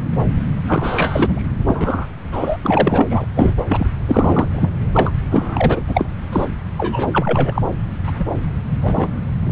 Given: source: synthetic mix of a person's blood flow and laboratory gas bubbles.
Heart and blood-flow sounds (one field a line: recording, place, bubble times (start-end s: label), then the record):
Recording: Doppler ultrasound of blood flow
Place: subclavian vein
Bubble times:
0.67-1.48 s: bubbles
1.67-2.07 s: bubbles
2.32-2.57 s: bubbles
2.63-3.25 s: bubbles
3.35-3.54 s: bubbles
3.68-3.87 s: bubbles
4.05-4.48 s: bubbles
4.54-4.69 s: bubbles
4.93-5.11 s: bubbles
5.30-5.80 s: bubbles
5.88-6.08 s: bubbles
6.32-6.46 s: bubbles
6.77-7.62 s: bubbles
8.06-8.25 s: bubbles
8.81-9.22 s: bubbles
9.44-9.52 s: bubbles
From the record:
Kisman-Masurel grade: 243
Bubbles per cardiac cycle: several, 3 to 8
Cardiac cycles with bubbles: 100%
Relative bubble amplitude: loud (0.450 to 0.775)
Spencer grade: 3 (all of the cardiac periods contain showers or single bubble signals, but not dominating or overriding the cardiac motion signals)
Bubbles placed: anywhere in the cardiac cycle